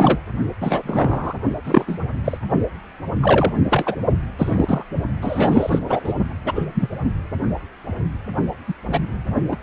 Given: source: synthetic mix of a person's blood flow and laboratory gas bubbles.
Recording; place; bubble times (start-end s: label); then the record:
Doppler ultrasound of blood flow; precordium
0.00-0.20 s: bubbles
0.60-1.34 s: bubbles
1.65-1.99 s: bubbles
2.24-2.38 s: bubbles
3.22-3.53 s: bubbles
3.70-3.96 s: bubbles
4.38-4.83 s: bubbles
5.21-6.00 s: bubbles
6.04-6.15 s: bubbles
6.46-6.66 s: bubbles
6.75-6.90 s: bubbles
8.67-8.73 s: bubbles
8.88-8.99 s: bubbles
9.48-9.57 s: bubbles
From the record:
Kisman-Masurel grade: 233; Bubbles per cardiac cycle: several, 3 to 8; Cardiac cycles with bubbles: 50 to 99%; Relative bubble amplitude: loud (0.450 to 0.775); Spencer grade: 3 (all of the cardiac periods contain showers or single bubble signals, but not dominating or overriding the cardiac motion signals); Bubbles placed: only in the low amplitude regions of the cardiac cycle